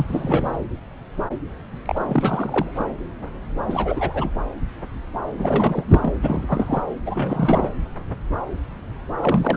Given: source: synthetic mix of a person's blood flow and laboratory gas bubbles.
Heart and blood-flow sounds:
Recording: Doppler ultrasound of blood flow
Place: subclavian vein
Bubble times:
0.00-0.56 s: bubbles
1.85-2.71 s: bubbles
2.78-2.86 s: bubbles
3.67-4.30 s: bubbles
5.38-6.18 s: bubbles
6.21-6.83 s: bubbles
7.05-7.72 s: bubbles
9.21-9.57 s: bubbles
From the record:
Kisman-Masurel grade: 332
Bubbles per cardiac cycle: rolling drumbeat, 9 or more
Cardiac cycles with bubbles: 50 to 99%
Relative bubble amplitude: moderate (0.250 to 0.450)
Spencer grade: 3 (all of the cardiac periods contain showers or single bubble signals, but not dominating or overriding the cardiac motion signals)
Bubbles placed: anywhere in the cardiac cycle

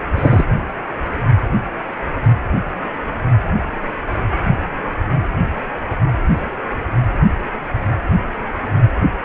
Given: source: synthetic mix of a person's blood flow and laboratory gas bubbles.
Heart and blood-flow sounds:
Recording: Doppler ultrasound of blood flow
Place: precordium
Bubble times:
0.15-0.44 s: bubbles
From the record:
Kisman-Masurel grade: 212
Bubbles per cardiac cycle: several, 3 to 8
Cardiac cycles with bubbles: 1 to 10%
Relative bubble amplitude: moderate (0.250 to 0.450)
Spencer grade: 1 (occasional bubble signal discernible with the cardiac motion signal, with majority of cardiac periods free of bubbles)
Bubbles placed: anywhere in the cardiac cycle

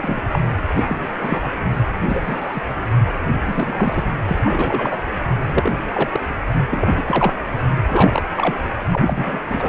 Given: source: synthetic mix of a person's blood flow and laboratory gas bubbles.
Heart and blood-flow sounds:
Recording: Doppler ultrasound of blood flow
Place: precordium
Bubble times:
0.01-0.20 s: bubbles
0.32-0.39 s: bubbles
0.77-0.84 s: bubbles
0.87-1.08 s: bubbles
1.22-1.52 s: bubbles
2.08-2.61 s: bubbles
3.45-4.06 s: bubbles
4.28-5.00 s: bubbles
5.43-5.72 s: bubbles
5.94-6.21 s: bubbles
6.70-7.33 s: bubbles
7.88-8.24 s: bubbles
8.36-8.55 s: bubbles
8.91-9.39 s: bubbles
9.49-9.69 s: bubbles
From the record:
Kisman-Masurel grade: 233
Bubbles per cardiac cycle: several, 3 to 8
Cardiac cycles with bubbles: 50 to 99%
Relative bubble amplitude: loud (0.450 to 0.775)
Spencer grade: 3 (all of the cardiac periods contain showers or single bubble signals, but not dominating or overriding the cardiac motion signals)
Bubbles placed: anywhere in the cardiac cycle

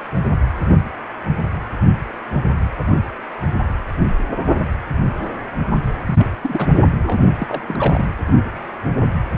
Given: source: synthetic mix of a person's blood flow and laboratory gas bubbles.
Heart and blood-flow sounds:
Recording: Doppler ultrasound of blood flow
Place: precordium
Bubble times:
6.06-6.26 s: bubbles
6.41-6.67 s: bubbles
7.06-7.19 s: bubbles
7.39-7.62 s: bubbles
7.67-8.10 s: bubbles
From the record:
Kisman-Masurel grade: 222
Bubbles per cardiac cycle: several, 3 to 8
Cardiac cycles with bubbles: 10 to 50%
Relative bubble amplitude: moderate (0.250 to 0.450)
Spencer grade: 2 (many but less than half of the cardiac periods contain bubble signals, singularly or in groups)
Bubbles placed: anywhere in the cardiac cycle

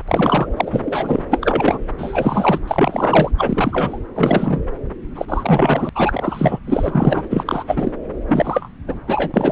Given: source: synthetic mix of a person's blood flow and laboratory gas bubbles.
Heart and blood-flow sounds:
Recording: Doppler ultrasound of blood flow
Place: subclavian vein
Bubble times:
0.08-0.47 s: bubbles
0.56-1.24 s: bubbles
1.31-1.79 s: bubbles
1.98-2.59 s: bubbles
2.68-3.31 s: bubbles
3.38-3.99 s: bubbles
4.15-4.62 s: bubbles
5.15-5.25 s: bubbles
5.28-5.89 s: bubbles
5.94-6.59 s: bubbles
6.67-7.22 s: bubbles
7.29-7.63 s: bubbles
7.67-7.92 s: bubbles
8.29-8.69 s: bubbles
8.87-9.00 s: bubbles
9.07-9.52 s: bubbles
From the record:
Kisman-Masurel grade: 343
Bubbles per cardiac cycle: rolling drumbeat, 9 or more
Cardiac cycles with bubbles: 100%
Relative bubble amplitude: loud (0.450 to 0.775)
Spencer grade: 3 (all of the cardiac periods contain showers or single bubble signals, but not dominating or overriding the cardiac motion signals)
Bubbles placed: anywhere in the cardiac cycle

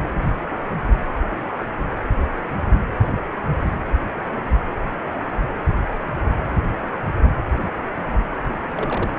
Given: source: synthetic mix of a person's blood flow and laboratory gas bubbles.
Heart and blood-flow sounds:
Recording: Doppler ultrasound of blood flow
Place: precordium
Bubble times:
0.24-0.36 s: bubbles
6.73-6.78 s: bubbles
8.75-9.12 s: bubbles
From the record:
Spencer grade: 2 (many but less than half of the cardiac periods contain bubble signals, singularly or in groups)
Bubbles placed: anywhere in the cardiac cycle

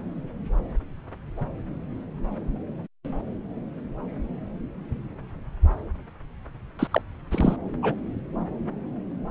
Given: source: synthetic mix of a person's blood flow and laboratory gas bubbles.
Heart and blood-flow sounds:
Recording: Doppler ultrasound of blood flow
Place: subclavian vein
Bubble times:
6.79-6.88 s: bubbles
6.91-7.02 s: bubbles
7.30-7.56 s: bubbles
7.82-7.95 s: bubbles
From the record:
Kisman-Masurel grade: 213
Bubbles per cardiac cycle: several, 3 to 8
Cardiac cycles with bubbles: 1 to 10%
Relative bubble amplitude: loud (0.450 to 0.775)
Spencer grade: 1 (occasional bubble signal discernible with the cardiac motion signal, with majority of cardiac periods free of bubbles)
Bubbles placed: anywhere in the cardiac cycle

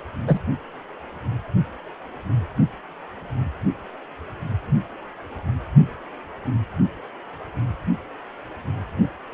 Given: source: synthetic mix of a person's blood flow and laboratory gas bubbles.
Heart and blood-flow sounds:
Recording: Doppler ultrasound of blood flow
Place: precordium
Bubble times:
0.27-0.39 s: bubbles
From the record:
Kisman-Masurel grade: 212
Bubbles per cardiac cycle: several, 3 to 8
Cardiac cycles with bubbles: 1 to 10%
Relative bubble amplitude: moderate (0.250 to 0.450)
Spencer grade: 1 (occasional bubble signal discernible with the cardiac motion signal, with majority of cardiac periods free of bubbles)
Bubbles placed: only in the low amplitude regions of the cardiac cycle

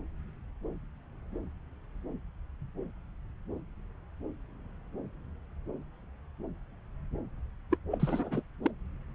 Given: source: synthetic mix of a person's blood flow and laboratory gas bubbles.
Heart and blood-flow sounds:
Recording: Doppler ultrasound of blood flow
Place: subclavian vein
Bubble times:
7.71-7.76 s: bubbles
7.91-8.42 s: bubbles
8.62-8.71 s: bubbles
From the record:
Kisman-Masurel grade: 211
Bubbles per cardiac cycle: several, 3 to 8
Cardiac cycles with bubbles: 1 to 10%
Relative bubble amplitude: barely perceptible (0.100 to 0.250)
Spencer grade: 1 (occasional bubble signal discernible with the cardiac motion signal, with majority of cardiac periods free of bubbles)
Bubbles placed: anywhere in the cardiac cycle

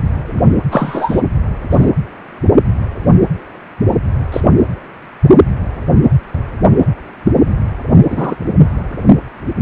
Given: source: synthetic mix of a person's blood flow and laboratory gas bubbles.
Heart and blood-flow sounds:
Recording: Doppler ultrasound of blood flow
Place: precordium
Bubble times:
0.26-0.48 s: bubbles
0.71-1.21 s: bubbles
1.70-1.90 s: bubbles
4.32-4.41 s: bubbles
8.10-8.36 s: bubbles
From the record:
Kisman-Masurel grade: 123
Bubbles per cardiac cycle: 1 to 2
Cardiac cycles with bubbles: 10 to 50%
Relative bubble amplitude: loud (0.450 to 0.775)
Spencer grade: 2 (many but less than half of the cardiac periods contain bubble signals, singularly or in groups)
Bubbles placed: anywhere in the cardiac cycle

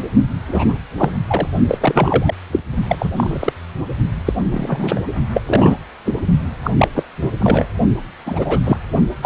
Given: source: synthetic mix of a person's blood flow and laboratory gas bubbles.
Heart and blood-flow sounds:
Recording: Doppler ultrasound of blood flow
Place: precordium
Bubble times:
0.00-0.03 s: bubbles
0.48-0.73 s: bubbles
0.97-1.17 s: bubbles
1.27-1.48 s: bubbles
1.68-2.34 s: bubbles
2.52-2.62 s: bubbles
2.89-2.96 s: bubbles
2.99-3.09 s: bubbles
3.16-3.53 s: bubbles
4.25-4.33 s: bubbles
4.50-5.00 s: bubbles
5.33-5.43 s: bubbles
5.46-5.78 s: bubbles
6.05-6.13 s: bubbles
6.63-6.71 s: bubbles
6.78-6.88 s: bubbles
6.95-7.04 s: bubbles
7.21-7.30 s: bubbles
7.38-7.66 s: bubbles
8.26-8.59 s: bubbles
8.63-8.77 s: bubbles
9.22-9.26 s: bubbles
From the record:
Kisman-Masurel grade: 243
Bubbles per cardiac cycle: several, 3 to 8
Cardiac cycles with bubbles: 100%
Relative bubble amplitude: loud (0.450 to 0.775)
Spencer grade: 3 (all of the cardiac periods contain showers or single bubble signals, but not dominating or overriding the cardiac motion signals)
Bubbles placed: only in the low amplitude regions of the cardiac cycle

